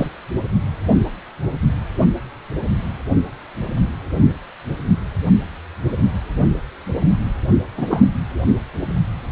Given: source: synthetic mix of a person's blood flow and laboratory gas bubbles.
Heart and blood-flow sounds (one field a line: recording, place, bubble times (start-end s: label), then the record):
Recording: Doppler ultrasound of blood flow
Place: precordium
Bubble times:
0.00-0.09 s: bubbles
7.77-7.86 s: bubbles
7.90-8.03 s: bubbles
From the record:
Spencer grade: 2 (many but less than half of the cardiac periods contain bubble signals, singularly or in groups)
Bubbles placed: anywhere in the cardiac cycle